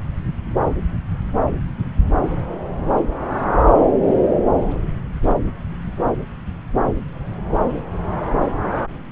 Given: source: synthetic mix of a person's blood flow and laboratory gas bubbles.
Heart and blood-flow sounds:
Doppler ultrasound of blood flow; subclavian vein
no bubbles
From the record:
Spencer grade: 0 (complete lack of bubble signals)

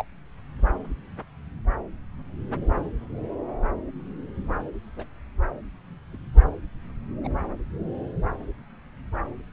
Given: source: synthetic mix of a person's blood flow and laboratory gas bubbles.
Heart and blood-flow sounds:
Doppler ultrasound of blood flow; subclavian vein
0.00-0.04 s: bubbles
4.96-5.05 s: bubbles
6.13-6.17 s: bubbles
7.24-7.28 s: bubbles
From the record:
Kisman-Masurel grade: 121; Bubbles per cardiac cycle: 1 to 2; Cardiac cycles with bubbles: 10 to 50%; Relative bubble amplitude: barely perceptible (0.100 to 0.250); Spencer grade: 2 (many but less than half of the cardiac periods contain bubble signals, singularly or in groups); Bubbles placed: anywhere in the cardiac cycle

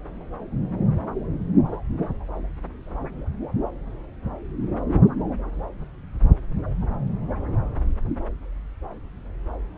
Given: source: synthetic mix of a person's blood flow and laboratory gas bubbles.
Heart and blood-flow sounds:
Doppler ultrasound of blood flow; subclavian vein
no bubbles
From the record:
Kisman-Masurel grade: 000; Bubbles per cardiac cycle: 0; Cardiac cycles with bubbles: 0%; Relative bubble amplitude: no bubbles discernible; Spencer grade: 0 (complete lack of bubble signals)

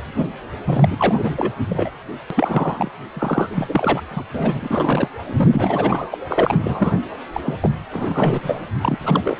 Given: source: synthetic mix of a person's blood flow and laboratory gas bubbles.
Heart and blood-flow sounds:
Doppler ultrasound of blood flow; precordium
0.64-1.52 s: bubbles
1.70-1.90 s: bubbles
2.30-2.91 s: bubbles
3.14-4.03 s: bubbles
4.10-4.23 s: bubbles
4.34-5.08 s: bubbles
5.26-6.07 s: bubbles
6.11-6.18 s: bubbles
6.27-6.97 s: bubbles
7.33-7.41 s: bubbles
7.45-7.71 s: bubbles
7.91-8.68 s: bubbles
8.81-9.37 s: bubbles
From the record:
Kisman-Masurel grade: 333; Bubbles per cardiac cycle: rolling drumbeat, 9 or more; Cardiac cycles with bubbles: 50 to 99%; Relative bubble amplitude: loud (0.450 to 0.775); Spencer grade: 3 (all of the cardiac periods contain showers or single bubble signals, but not dominating or overriding the cardiac motion signals); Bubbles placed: anywhere in the cardiac cycle

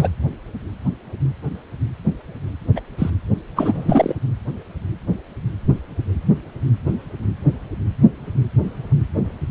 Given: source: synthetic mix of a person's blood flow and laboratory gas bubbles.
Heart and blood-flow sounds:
Doppler ultrasound of blood flow; precordium
0.00-0.09 s: bubbles
2.76-2.81 s: bubbles
2.98-3.10 s: bubbles
3.56-4.15 s: bubbles
From the record:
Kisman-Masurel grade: 222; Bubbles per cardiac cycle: several, 3 to 8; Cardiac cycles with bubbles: 10 to 50%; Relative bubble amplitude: moderate (0.250 to 0.450); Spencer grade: 2 (many but less than half of the cardiac periods contain bubble signals, singularly or in groups); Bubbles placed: only in the low amplitude regions of the cardiac cycle

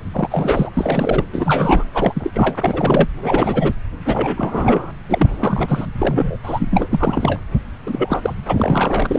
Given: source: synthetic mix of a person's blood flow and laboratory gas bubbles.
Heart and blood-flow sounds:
Doppler ultrasound of blood flow; subclavian vein
0.13-0.70 s: bubbles
0.74-1.26 s: bubbles
1.32-1.84 s: bubbles
1.94-2.56 s: bubbles
2.60-3.08 s: bubbles
3.22-3.72 s: bubbles
4.06-4.92 s: bubbles
5.09-5.87 s: bubbles
5.98-6.37 s: bubbles
6.43-6.68 s: bubbles
6.71-6.87 s: bubbles
6.91-7.39 s: bubbles
7.86-8.34 s: bubbles
8.46-9.19 s: bubbles
From the record:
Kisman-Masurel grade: 332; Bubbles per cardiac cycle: rolling drumbeat, 9 or more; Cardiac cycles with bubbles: 50 to 99%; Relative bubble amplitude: moderate (0.250 to 0.450); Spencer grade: 3 (all of the cardiac periods contain showers or single bubble signals, but not dominating or overriding the cardiac motion signals); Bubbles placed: anywhere in the cardiac cycle

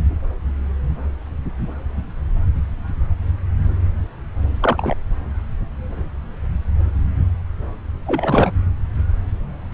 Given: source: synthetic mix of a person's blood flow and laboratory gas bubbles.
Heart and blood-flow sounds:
Doppler ultrasound of blood flow; subclavian vein
4.61-4.95 s: bubbles
8.06-8.52 s: bubbles
From the record:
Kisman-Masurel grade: 222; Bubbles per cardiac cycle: several, 3 to 8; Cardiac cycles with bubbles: 10 to 50%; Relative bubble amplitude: moderate (0.250 to 0.450); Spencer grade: 2 (many but less than half of the cardiac periods contain bubble signals, singularly or in groups); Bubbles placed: anywhere in the cardiac cycle

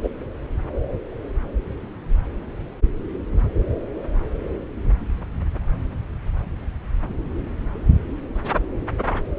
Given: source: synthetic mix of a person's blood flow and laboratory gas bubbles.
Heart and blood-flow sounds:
Doppler ultrasound of blood flow; subclavian vein
0.02-0.09 s: bubbles
From the record:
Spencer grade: 1 (occasional bubble signal discernible with the cardiac motion signal, with majority of cardiac periods free of bubbles); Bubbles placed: anywhere in the cardiac cycle

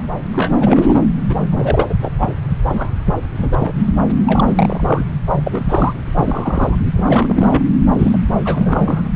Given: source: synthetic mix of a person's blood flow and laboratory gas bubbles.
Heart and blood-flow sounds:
Doppler ultrasound of blood flow; subclavian vein
0.00-0.02 s: bubbles
0.31-1.01 s: bubbles
1.29-1.35 s: bubbles
1.44-1.86 s: bubbles
1.89-1.94 s: bubbles
2.01-2.10 s: bubbles
2.19-2.29 s: bubbles
2.69-2.92 s: bubbles
3.42-3.73 s: bubbles
3.77-3.90 s: bubbles
4.10-5.05 s: bubbles
5.46-5.94 s: bubbles
6.16-6.78 s: bubbles
6.96-7.62 s: bubbles
7.97-8.17 s: bubbles
8.45-9.05 s: bubbles
From the record:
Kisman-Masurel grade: 342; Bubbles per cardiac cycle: rolling drumbeat, 9 or more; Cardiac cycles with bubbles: 100%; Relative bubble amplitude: moderate (0.250 to 0.450); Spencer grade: 3 (all of the cardiac periods contain showers or single bubble signals, but not dominating or overriding the cardiac motion signals); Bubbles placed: anywhere in the cardiac cycle

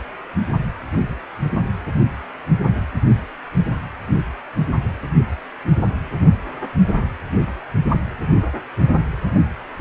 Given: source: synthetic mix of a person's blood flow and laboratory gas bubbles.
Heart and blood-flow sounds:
Doppler ultrasound of blood flow; precordium
7.94-7.97 s: bubbles
From the record:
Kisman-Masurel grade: 111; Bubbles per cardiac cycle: 1 to 2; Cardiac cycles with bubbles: 1 to 10%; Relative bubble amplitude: barely perceptible (0.100 to 0.250); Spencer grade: 1 (occasional bubble signal discernible with the cardiac motion signal, with majority of cardiac periods free of bubbles); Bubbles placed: only in the low amplitude regions of the cardiac cycle

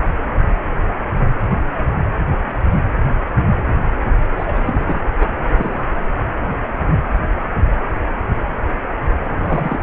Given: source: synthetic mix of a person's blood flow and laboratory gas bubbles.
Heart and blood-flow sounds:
Doppler ultrasound of blood flow; precordium
4.37-5.05 s: bubbles
5.20-5.29 s: bubbles
5.52-5.88 s: bubbles
9.25-9.80 s: bubbles
From the record:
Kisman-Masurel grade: 222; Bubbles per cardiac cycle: several, 3 to 8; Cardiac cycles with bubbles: 10 to 50%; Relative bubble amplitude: moderate (0.250 to 0.450); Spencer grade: 2 (many but less than half of the cardiac periods contain bubble signals, singularly or in groups); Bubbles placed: anywhere in the cardiac cycle

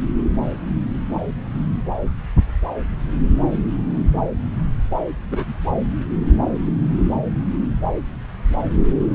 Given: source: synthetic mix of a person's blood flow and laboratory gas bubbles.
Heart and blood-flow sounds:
Doppler ultrasound of blood flow; subclavian vein
5.29-5.54 s: bubbles
From the record:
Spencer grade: 1 (occasional bubble signal discernible with the cardiac motion signal, with majority of cardiac periods free of bubbles); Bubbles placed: anywhere in the cardiac cycle

